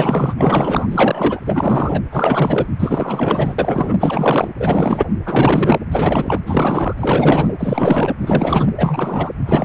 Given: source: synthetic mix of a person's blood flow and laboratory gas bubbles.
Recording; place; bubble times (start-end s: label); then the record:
Doppler ultrasound of blood flow; precordium
0.00-0.34 s: bubbles
0.38-1.40 s: bubbles
1.46-2.01 s: bubbles
2.12-2.67 s: bubbles
2.79-3.96 s: bubbles
4.00-4.51 s: bubbles
4.60-5.06 s: bubbles
5.25-5.79 s: bubbles
5.92-6.41 s: bubbles
6.46-6.94 s: bubbles
6.98-7.53 s: bubbles
7.59-8.15 s: bubbles
8.21-8.72 s: bubbles
8.78-9.31 s: bubbles
9.45-9.65 s: bubbles
From the record:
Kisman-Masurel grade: 444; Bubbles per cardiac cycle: continuous sound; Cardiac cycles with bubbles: 100%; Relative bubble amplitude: maximal (0.775 to 0.999); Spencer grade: 4 (maximum detectable bubble signal sounding continuously throughout systole and diastole of every cardiac period, and overriding the amplitude of the normal cardiac signals); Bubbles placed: anywhere in the cardiac cycle